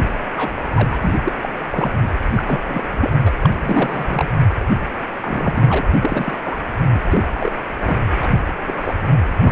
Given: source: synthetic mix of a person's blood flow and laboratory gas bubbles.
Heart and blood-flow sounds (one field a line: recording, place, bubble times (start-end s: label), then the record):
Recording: Doppler ultrasound of blood flow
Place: precordium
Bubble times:
0.36-0.55 s: bubbles
0.74-0.97 s: bubbles
1.01-1.15 s: bubbles
1.23-1.33 s: bubbles
1.42-1.49 s: bubbles
1.71-2.17 s: bubbles
2.35-2.59 s: bubbles
2.67-2.83 s: bubbles
2.92-2.98 s: bubbles
3.00-3.10 s: bubbles
3.25-3.31 s: bubbles
3.42-3.50 s: bubbles
3.59-4.27 s: bubbles
4.81-4.87 s: bubbles
5.21-5.82 s: bubbles
6.01-6.38 s: bubbles
6.44-6.58 s: bubbles
6.91-7.00 s: bubbles
7.10-7.50 s: bubbles
7.79-7.97 s: bubbles
8.21-8.40 s: bubbles
8.67-8.75 s: bubbles
8.81-8.95 s: bubbles
9.43-9.52 s: bubbles
From the record:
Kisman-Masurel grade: 242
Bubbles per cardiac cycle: several, 3 to 8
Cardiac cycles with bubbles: 100%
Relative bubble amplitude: moderate (0.250 to 0.450)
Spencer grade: 3 (all of the cardiac periods contain showers or single bubble signals, but not dominating or overriding the cardiac motion signals)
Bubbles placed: anywhere in the cardiac cycle